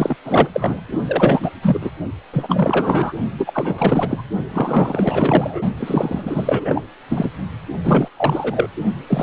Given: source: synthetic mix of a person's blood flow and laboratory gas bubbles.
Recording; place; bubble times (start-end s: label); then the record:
Doppler ultrasound of blood flow; precordium
0.00-0.17 s: bubbles
0.24-0.81 s: bubbles
1.07-1.51 s: bubbles
1.62-1.91 s: bubbles
2.33-3.13 s: bubbles
3.38-4.24 s: bubbles
4.49-5.62 s: bubbles
5.77-6.82 s: bubbles
7.08-7.30 s: bubbles
7.85-8.08 s: bubbles
8.16-8.68 s: bubbles
9.07-9.23 s: bubbles
From the record:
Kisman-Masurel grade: 444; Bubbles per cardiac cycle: continuous sound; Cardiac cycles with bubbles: 100%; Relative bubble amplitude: maximal (0.775 to 0.999); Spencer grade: 4 (maximum detectable bubble signal sounding continuously throughout systole and diastole of every cardiac period, and overriding the amplitude of the normal cardiac signals); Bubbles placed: only in the low amplitude regions of the cardiac cycle